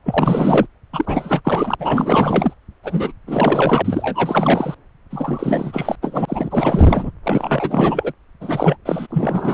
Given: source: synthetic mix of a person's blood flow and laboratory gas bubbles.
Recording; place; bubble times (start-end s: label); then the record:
Doppler ultrasound of blood flow; subclavian vein
0.05-0.67 s: bubbles
0.93-1.75 s: bubbles
1.78-2.54 s: bubbles
2.83-3.13 s: bubbles
3.27-3.82 s: bubbles
3.85-4.75 s: bubbles
5.10-5.96 s: bubbles
6.01-7.10 s: bubbles
7.23-8.13 s: bubbles
8.40-8.77 s: bubbles
8.85-9.07 s: bubbles
9.09-9.54 s: bubbles
From the record:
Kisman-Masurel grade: 444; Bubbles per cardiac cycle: continuous sound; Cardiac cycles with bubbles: 100%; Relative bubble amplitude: maximal (0.775 to 0.999); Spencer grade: 4 (maximum detectable bubble signal sounding continuously throughout systole and diastole of every cardiac period, and overriding the amplitude of the normal cardiac signals); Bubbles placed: anywhere in the cardiac cycle